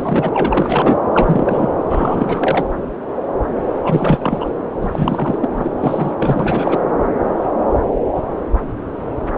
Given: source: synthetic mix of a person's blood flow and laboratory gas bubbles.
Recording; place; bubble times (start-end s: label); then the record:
Doppler ultrasound of blood flow; subclavian vein
0.00-0.29 s: bubbles
0.33-1.00 s: bubbles
1.14-1.72 s: bubbles
1.88-2.65 s: bubbles
3.84-4.50 s: bubbles
4.81-4.88 s: bubbles
4.92-5.38 s: bubbles
5.41-5.49 s: bubbles
5.57-6.13 s: bubbles
6.19-6.80 s: bubbles
From the record:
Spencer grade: 3 (all of the cardiac periods contain showers or single bubble signals, but not dominating or overriding the cardiac motion signals); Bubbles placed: anywhere in the cardiac cycle